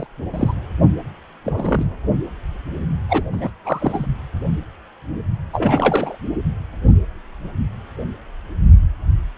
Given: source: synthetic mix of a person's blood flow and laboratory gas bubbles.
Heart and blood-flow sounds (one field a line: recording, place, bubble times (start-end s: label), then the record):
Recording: Doppler ultrasound of blood flow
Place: precordium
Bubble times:
0.00-0.07 s: bubbles
0.34-0.54 s: bubbles
0.84-0.86 s: bubbles
1.44-1.90 s: bubbles
3.08-3.24 s: bubbles
3.32-3.50 s: bubbles
3.65-4.06 s: bubbles
5.53-6.17 s: bubbles
From the record:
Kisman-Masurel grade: 222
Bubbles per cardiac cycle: several, 3 to 8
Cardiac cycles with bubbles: 10 to 50%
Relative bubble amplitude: moderate (0.250 to 0.450)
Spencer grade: 2 (many but less than half of the cardiac periods contain bubble signals, singularly or in groups)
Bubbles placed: anywhere in the cardiac cycle